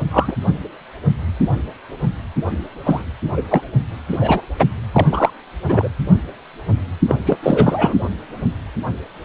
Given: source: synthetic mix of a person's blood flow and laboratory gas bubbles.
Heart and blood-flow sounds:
Doppler ultrasound of blood flow; precordium
0.10-0.36 s: bubbles
2.85-3.04 s: bubbles
3.37-3.42 s: bubbles
3.50-3.62 s: bubbles
4.10-4.42 s: bubbles
4.58-4.69 s: bubbles
4.92-5.30 s: bubbles
5.68-5.88 s: bubbles
7.08-7.15 s: bubbles
7.26-7.38 s: bubbles
7.42-7.95 s: bubbles
From the record:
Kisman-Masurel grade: 333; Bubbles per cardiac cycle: rolling drumbeat, 9 or more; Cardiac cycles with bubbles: 50 to 99%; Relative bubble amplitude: loud (0.450 to 0.775); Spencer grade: 3 (all of the cardiac periods contain showers or single bubble signals, but not dominating or overriding the cardiac motion signals); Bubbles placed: anywhere in the cardiac cycle

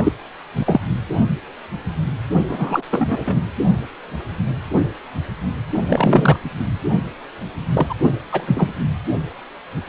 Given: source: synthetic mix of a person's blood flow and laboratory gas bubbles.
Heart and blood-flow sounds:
Doppler ultrasound of blood flow; precordium
0.00-0.12 s: bubbles
0.55-0.80 s: bubbles
2.48-2.83 s: bubbles
2.90-3.41 s: bubbles
5.71-6.39 s: bubbles
7.75-7.94 s: bubbles
8.31-8.74 s: bubbles
From the record:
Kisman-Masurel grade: 233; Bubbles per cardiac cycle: several, 3 to 8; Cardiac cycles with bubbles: 50 to 99%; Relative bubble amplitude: loud (0.450 to 0.775); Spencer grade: 3 (all of the cardiac periods contain showers or single bubble signals, but not dominating or overriding the cardiac motion signals); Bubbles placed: only in the low amplitude regions of the cardiac cycle

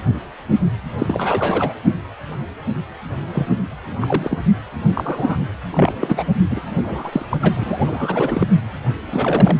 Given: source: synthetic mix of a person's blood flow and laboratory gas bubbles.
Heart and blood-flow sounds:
Doppler ultrasound of blood flow; precordium
0.98-1.74 s: bubbles
3.33-3.48 s: bubbles
4.01-4.38 s: bubbles
4.93-5.37 s: bubbles
5.72-6.23 s: bubbles
6.50-6.61 s: bubbles
6.83-7.25 s: bubbles
7.29-7.37 s: bubbles
7.41-8.46 s: bubbles
9.11-9.57 s: bubbles
From the record:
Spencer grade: 3 (all of the cardiac periods contain showers or single bubble signals, but not dominating or overriding the cardiac motion signals); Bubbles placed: anywhere in the cardiac cycle

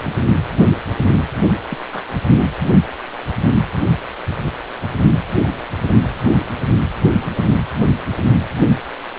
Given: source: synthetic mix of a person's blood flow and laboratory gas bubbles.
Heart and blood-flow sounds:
Doppler ultrasound of blood flow; precordium
1.70-1.78 s: bubbles
1.92-2.02 s: bubbles
From the record:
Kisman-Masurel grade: 121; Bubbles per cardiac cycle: 1 to 2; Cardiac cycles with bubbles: 10 to 50%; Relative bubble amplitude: barely perceptible (0.100 to 0.250); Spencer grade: 2 (many but less than half of the cardiac periods contain bubble signals, singularly or in groups); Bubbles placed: anywhere in the cardiac cycle

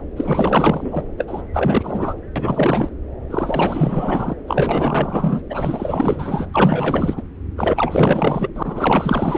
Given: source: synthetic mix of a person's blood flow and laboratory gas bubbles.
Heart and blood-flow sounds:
Doppler ultrasound of blood flow; subclavian vein
0.16-1.07 s: bubbles
1.17-1.42 s: bubbles
1.53-2.15 s: bubbles
2.35-2.90 s: bubbles
3.30-4.36 s: bubbles
4.48-5.42 s: bubbles
5.50-6.47 s: bubbles
6.54-7.22 s: bubbles
7.56-8.51 s: bubbles
8.55-9.38 s: bubbles
From the record:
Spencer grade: 4 (maximum detectable bubble signal sounding continuously throughout systole and diastole of every cardiac period, and overriding the amplitude of the normal cardiac signals); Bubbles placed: anywhere in the cardiac cycle

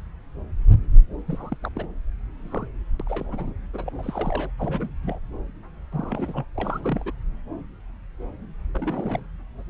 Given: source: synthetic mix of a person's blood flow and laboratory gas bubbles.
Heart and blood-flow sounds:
Doppler ultrasound of blood flow; subclavian vein
1.28-1.56 s: bubbles
1.62-1.69 s: bubbles
1.75-1.86 s: bubbles
2.40-2.65 s: bubbles
3.00-3.03 s: bubbles
3.06-3.53 s: bubbles
3.73-3.92 s: bubbles
3.98-4.51 s: bubbles
4.58-4.93 s: bubbles
5.02-5.19 s: bubbles
5.92-6.45 s: bubbles
6.56-7.12 s: bubbles
8.72-9.22 s: bubbles
From the record:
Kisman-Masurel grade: 221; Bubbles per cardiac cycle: several, 3 to 8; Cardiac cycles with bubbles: 10 to 50%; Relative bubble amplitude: barely perceptible (0.100 to 0.250); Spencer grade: 2 (many but less than half of the cardiac periods contain bubble signals, singularly or in groups); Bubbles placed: anywhere in the cardiac cycle

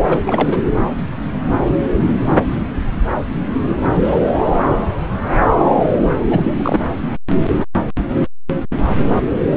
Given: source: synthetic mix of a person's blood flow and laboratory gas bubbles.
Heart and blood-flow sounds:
Doppler ultrasound of blood flow; subclavian vein
0.09-0.18 s: bubbles
0.25-0.64 s: bubbles
3.68-3.77 s: bubbles
3.95-4.19 s: bubbles
6.29-6.89 s: bubbles
From the record:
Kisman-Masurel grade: 222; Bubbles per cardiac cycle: several, 3 to 8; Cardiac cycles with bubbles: 10 to 50%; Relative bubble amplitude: moderate (0.250 to 0.450); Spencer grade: 2 (many but less than half of the cardiac periods contain bubble signals, singularly or in groups); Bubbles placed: anywhere in the cardiac cycle

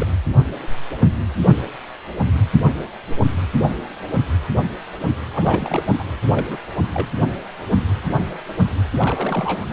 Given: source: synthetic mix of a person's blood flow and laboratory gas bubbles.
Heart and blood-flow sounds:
Doppler ultrasound of blood flow; precordium
0.00-0.07 s: bubbles
5.33-5.83 s: bubbles
5.98-6.03 s: bubbles
6.31-6.46 s: bubbles
6.48-6.57 s: bubbles
6.93-7.08 s: bubbles
8.99-9.66 s: bubbles
From the record:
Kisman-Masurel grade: 222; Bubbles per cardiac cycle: several, 3 to 8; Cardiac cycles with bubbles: 10 to 50%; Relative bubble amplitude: moderate (0.250 to 0.450); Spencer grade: 2 (many but less than half of the cardiac periods contain bubble signals, singularly or in groups); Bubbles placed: anywhere in the cardiac cycle

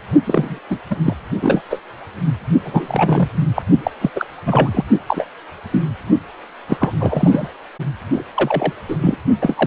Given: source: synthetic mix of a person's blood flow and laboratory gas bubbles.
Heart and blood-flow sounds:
Doppler ultrasound of blood flow; precordium
0.25-0.60 s: bubbles
0.70-0.78 s: bubbles
0.90-0.96 s: bubbles
1.04-1.14 s: bubbles
1.42-1.61 s: bubbles
1.70-1.80 s: bubbles
2.64-3.27 s: bubbles
3.55-3.62 s: bubbles
3.83-3.91 s: bubbles
4.01-4.11 s: bubbles
4.15-4.27 s: bubbles
4.45-4.85 s: bubbles
5.08-5.26 s: bubbles
5.72-5.85 s: bubbles
6.68-6.93 s: bubbles
7.00-7.48 s: bubbles
8.12-8.22 s: bubbles
8.35-8.74 s: bubbles
8.88-8.96 s: bubbles
9.01-9.17 s: bubbles
9.41-9.67 s: bubbles
From the record:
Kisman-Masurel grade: 243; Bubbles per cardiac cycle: several, 3 to 8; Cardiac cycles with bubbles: 100%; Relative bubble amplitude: loud (0.450 to 0.775); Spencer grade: 3 (all of the cardiac periods contain showers or single bubble signals, but not dominating or overriding the cardiac motion signals); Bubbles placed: only in the low amplitude regions of the cardiac cycle

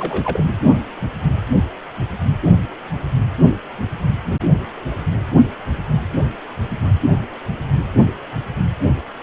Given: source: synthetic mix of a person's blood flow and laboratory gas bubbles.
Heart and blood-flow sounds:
Doppler ultrasound of blood flow; precordium
0.00-0.46 s: bubbles
From the record:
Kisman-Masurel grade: 222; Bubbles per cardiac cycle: several, 3 to 8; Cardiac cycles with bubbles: 10 to 50%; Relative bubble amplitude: moderate (0.250 to 0.450); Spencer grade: 2 (many but less than half of the cardiac periods contain bubble signals, singularly or in groups); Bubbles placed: only in the low amplitude regions of the cardiac cycle

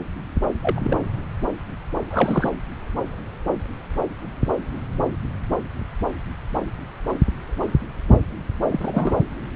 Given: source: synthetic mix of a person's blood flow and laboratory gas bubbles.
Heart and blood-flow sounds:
Doppler ultrasound of blood flow; subclavian vein
0.62-0.80 s: bubbles
0.83-1.00 s: bubbles
2.10-2.50 s: bubbles
8.69-9.15 s: bubbles
From the record:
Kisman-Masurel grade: 212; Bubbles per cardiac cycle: several, 3 to 8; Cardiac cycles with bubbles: 1 to 10%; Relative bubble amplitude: moderate (0.250 to 0.450); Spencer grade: 1 (occasional bubble signal discernible with the cardiac motion signal, with majority of cardiac periods free of bubbles); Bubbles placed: anywhere in the cardiac cycle

